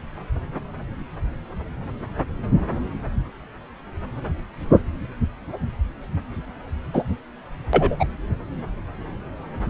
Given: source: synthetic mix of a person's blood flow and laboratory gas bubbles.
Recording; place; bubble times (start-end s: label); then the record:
Doppler ultrasound of blood flow; subclavian vein
6.93-7.04 s: bubbles
7.73-7.96 s: bubbles
8.00-8.05 s: bubbles
From the record:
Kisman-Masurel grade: 123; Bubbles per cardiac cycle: 1 to 2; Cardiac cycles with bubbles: 10 to 50%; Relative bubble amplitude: loud (0.450 to 0.775); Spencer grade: 2 (many but less than half of the cardiac periods contain bubble signals, singularly or in groups); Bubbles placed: anywhere in the cardiac cycle